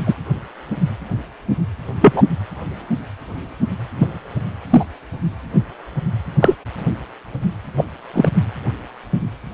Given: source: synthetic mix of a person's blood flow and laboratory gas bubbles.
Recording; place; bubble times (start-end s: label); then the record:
Doppler ultrasound of blood flow; precordium
0.05-0.14 s: bubbles
2.01-2.23 s: bubbles
3.98-4.08 s: bubbles
4.70-4.84 s: bubbles
6.39-6.55 s: bubbles
7.77-7.84 s: bubbles
8.14-8.29 s: bubbles
From the record:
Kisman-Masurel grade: 123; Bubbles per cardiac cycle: 1 to 2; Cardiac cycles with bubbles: 10 to 50%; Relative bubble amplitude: loud (0.450 to 0.775); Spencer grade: 2 (many but less than half of the cardiac periods contain bubble signals, singularly or in groups); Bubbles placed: anywhere in the cardiac cycle